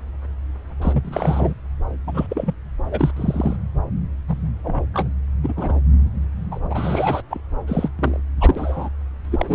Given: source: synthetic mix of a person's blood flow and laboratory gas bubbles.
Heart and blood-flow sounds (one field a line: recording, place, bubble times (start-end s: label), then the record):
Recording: Doppler ultrasound of blood flow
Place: subclavian vein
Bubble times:
0.82-1.54 s: bubbles
2.07-2.27 s: bubbles
2.29-2.53 s: bubbles
2.92-3.11 s: bubbles
3.16-3.56 s: bubbles
4.28-4.50 s: bubbles
4.64-4.83 s: bubbles
4.94-5.08 s: bubbles
5.43-5.53 s: bubbles
5.57-5.81 s: bubbles
6.51-6.60 s: bubbles
6.70-7.22 s: bubbles
7.30-7.41 s: bubbles
7.67-7.89 s: bubbles
7.99-8.20 s: bubbles
8.40-8.89 s: bubbles
9.31-9.55 s: bubbles
From the record:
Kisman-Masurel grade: 242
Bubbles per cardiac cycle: several, 3 to 8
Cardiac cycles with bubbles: 100%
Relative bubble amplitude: moderate (0.250 to 0.450)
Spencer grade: 3 (all of the cardiac periods contain showers or single bubble signals, but not dominating or overriding the cardiac motion signals)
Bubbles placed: anywhere in the cardiac cycle